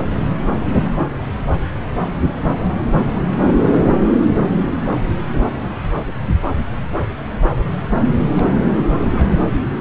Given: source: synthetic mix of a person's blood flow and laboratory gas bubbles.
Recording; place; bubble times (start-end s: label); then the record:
Doppler ultrasound of blood flow; subclavian vein
8.32-8.53 s: bubbles
8.78-8.93 s: bubbles
9.02-9.38 s: bubbles
From the record:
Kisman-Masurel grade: 211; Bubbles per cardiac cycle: several, 3 to 8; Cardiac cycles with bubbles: 1 to 10%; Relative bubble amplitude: barely perceptible (0.100 to 0.250); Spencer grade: 1 (occasional bubble signal discernible with the cardiac motion signal, with majority of cardiac periods free of bubbles); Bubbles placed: anywhere in the cardiac cycle